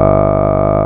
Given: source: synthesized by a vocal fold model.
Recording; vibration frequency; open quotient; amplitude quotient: sustained vowel; 50 Hz; 0.3; 1.3